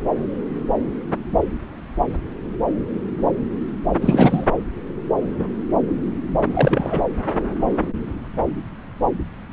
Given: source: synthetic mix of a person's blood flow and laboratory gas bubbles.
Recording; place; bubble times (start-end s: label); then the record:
Doppler ultrasound of blood flow; subclavian vein
4.01-4.46 s: bubbles
6.51-7.04 s: bubbles
From the record:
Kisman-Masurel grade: 213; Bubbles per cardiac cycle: several, 3 to 8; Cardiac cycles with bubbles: 1 to 10%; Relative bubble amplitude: loud (0.450 to 0.775); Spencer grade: 1 (occasional bubble signal discernible with the cardiac motion signal, with majority of cardiac periods free of bubbles); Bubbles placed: anywhere in the cardiac cycle